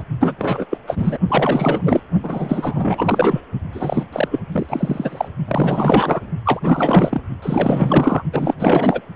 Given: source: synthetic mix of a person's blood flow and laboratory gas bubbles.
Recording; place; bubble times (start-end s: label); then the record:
Doppler ultrasound of blood flow; precordium
0.00-0.04 s: bubbles
0.20-0.66 s: bubbles
0.70-0.78 s: bubbles
0.87-1.19 s: bubbles
1.28-2.00 s: bubbles
2.22-3.41 s: bubbles
3.73-4.04 s: bubbles
4.12-4.28 s: bubbles
4.31-4.40 s: bubbles
4.52-4.66 s: bubbles
4.69-5.29 s: bubbles
5.48-6.21 s: bubbles
6.45-7.21 s: bubbles
7.42-8.22 s: bubbles
8.32-8.54 s: bubbles
8.59-9.01 s: bubbles
From the record:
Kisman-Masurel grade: 444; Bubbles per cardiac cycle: continuous sound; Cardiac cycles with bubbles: 100%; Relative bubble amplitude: maximal (0.775 to 0.999); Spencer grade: 4 (maximum detectable bubble signal sounding continuously throughout systole and diastole of every cardiac period, and overriding the amplitude of the normal cardiac signals); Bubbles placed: only in the low amplitude regions of the cardiac cycle